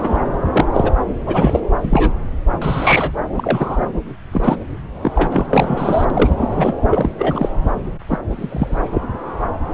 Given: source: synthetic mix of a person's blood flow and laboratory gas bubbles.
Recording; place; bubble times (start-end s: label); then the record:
Doppler ultrasound of blood flow; subclavian vein
0.00-0.18 s: bubbles
0.51-0.65 s: bubbles
0.74-0.92 s: bubbles
1.26-1.60 s: bubbles
1.83-2.13 s: bubbles
2.62-3.12 s: bubbles
3.35-3.86 s: bubbles
4.31-4.57 s: bubbles
5.02-5.27 s: bubbles
5.30-5.47 s: bubbles
5.49-6.05 s: bubbles
6.10-6.74 s: bubbles
6.90-7.13 s: bubbles
7.18-7.48 s: bubbles
8.08-8.18 s: bubbles
8.30-8.79 s: bubbles
8.91-9.02 s: bubbles
From the record:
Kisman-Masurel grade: 233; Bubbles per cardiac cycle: several, 3 to 8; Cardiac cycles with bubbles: 50 to 99%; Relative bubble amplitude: loud (0.450 to 0.775); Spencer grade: 3 (all of the cardiac periods contain showers or single bubble signals, but not dominating or overriding the cardiac motion signals); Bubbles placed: anywhere in the cardiac cycle